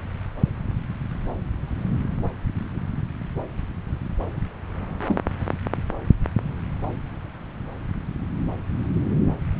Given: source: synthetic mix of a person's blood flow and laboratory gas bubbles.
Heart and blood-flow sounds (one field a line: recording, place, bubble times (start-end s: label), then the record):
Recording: Doppler ultrasound of blood flow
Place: subclavian vein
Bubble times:
5.06-5.20 s: bubbles
From the record:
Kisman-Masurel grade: 112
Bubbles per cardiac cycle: 1 to 2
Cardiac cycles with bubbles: 1 to 10%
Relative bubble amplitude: moderate (0.250 to 0.450)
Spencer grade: 1 (occasional bubble signal discernible with the cardiac motion signal, with majority of cardiac periods free of bubbles)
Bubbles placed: anywhere in the cardiac cycle